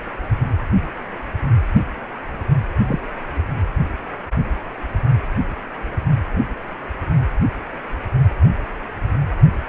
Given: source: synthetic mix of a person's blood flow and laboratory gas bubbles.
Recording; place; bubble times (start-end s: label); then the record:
Doppler ultrasound of blood flow; precordium
2.85-2.99 s: bubbles
From the record:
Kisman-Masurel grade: 112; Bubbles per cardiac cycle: 1 to 2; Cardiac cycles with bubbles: 1 to 10%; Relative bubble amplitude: moderate (0.250 to 0.450); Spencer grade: 1 (occasional bubble signal discernible with the cardiac motion signal, with majority of cardiac periods free of bubbles); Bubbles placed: only in the low amplitude regions of the cardiac cycle